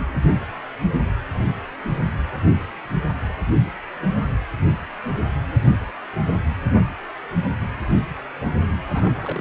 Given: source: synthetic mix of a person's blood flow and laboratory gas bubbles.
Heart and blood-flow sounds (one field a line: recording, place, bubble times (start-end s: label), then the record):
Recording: Doppler ultrasound of blood flow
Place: precordium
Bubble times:
8.90-9.41 s: bubbles
From the record:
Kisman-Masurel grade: 221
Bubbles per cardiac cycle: several, 3 to 8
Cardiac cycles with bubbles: 10 to 50%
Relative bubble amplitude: barely perceptible (0.100 to 0.250)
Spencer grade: 2 (many but less than half of the cardiac periods contain bubble signals, singularly or in groups)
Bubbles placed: anywhere in the cardiac cycle